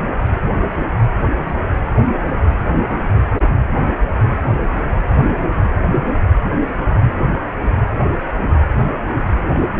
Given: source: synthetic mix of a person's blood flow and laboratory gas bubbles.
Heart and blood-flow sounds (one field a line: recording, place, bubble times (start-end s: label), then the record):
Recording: Doppler ultrasound of blood flow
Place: precordium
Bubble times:
0.28-0.50 s: bubbles
1.45-1.58 s: bubbles
4.22-4.26 s: bubbles
8.08-8.14 s: bubbles
9.54-9.59 s: bubbles
From the record:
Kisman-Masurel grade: 121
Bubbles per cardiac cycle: 1 to 2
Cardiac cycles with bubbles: 10 to 50%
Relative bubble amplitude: barely perceptible (0.100 to 0.250)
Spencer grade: 2 (many but less than half of the cardiac periods contain bubble signals, singularly or in groups)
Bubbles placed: anywhere in the cardiac cycle